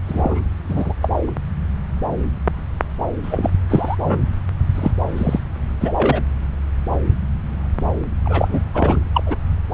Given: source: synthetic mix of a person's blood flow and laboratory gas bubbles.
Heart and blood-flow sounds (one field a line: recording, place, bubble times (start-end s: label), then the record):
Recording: Doppler ultrasound of blood flow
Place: subclavian vein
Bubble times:
0.07-0.41 s: bubbles
0.69-0.94 s: bubbles
1.02-1.32 s: bubbles
3.23-3.50 s: bubbles
3.69-3.96 s: bubbles
3.99-4.26 s: bubbles
4.74-4.91 s: bubbles
5.16-5.40 s: bubbles
5.80-6.21 s: bubbles
8.25-8.59 s: bubbles
8.74-9.01 s: bubbles
9.14-9.23 s: bubbles
9.26-9.36 s: bubbles
From the record:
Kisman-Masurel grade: 232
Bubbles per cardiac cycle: several, 3 to 8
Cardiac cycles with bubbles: 50 to 99%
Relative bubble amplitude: moderate (0.250 to 0.450)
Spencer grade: 3 (all of the cardiac periods contain showers or single bubble signals, but not dominating or overriding the cardiac motion signals)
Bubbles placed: anywhere in the cardiac cycle